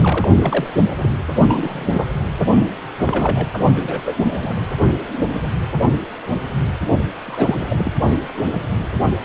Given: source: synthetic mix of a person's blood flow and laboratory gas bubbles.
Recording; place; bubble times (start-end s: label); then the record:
Doppler ultrasound of blood flow; precordium
0.00-0.28 s: bubbles
0.42-0.67 s: bubbles
1.02-1.09 s: bubbles
1.48-2.06 s: bubbles
2.98-3.47 s: bubbles
3.76-4.15 s: bubbles
4.33-4.54 s: bubbles
6.98-7.04 s: bubbles
7.23-7.91 s: bubbles
From the record:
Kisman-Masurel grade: 232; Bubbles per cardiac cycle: several, 3 to 8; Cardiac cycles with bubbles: 50 to 99%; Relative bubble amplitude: moderate (0.250 to 0.450); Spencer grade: 3 (all of the cardiac periods contain showers or single bubble signals, but not dominating or overriding the cardiac motion signals); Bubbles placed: only in the low amplitude regions of the cardiac cycle